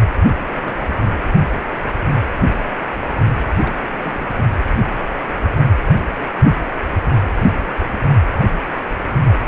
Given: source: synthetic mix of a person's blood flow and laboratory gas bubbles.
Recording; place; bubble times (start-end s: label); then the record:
Doppler ultrasound of blood flow; precordium
0.46-1.08 s: bubbles
3.59-3.75 s: bubbles
4.02-4.28 s: bubbles
4.36-4.46 s: bubbles
From the record:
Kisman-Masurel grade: 221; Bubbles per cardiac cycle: several, 3 to 8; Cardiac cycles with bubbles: 10 to 50%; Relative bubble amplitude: barely perceptible (0.100 to 0.250); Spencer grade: 2 (many but less than half of the cardiac periods contain bubble signals, singularly or in groups); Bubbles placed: anywhere in the cardiac cycle